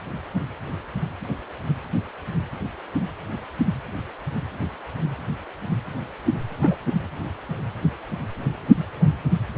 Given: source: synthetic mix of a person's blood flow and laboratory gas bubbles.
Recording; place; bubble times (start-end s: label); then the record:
Doppler ultrasound of blood flow; precordium
6.59-6.75 s: bubbles
From the record:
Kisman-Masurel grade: 112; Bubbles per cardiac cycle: 1 to 2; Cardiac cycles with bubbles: 1 to 10%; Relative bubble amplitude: moderate (0.250 to 0.450); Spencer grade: 1 (occasional bubble signal discernible with the cardiac motion signal, with majority of cardiac periods free of bubbles); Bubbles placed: anywhere in the cardiac cycle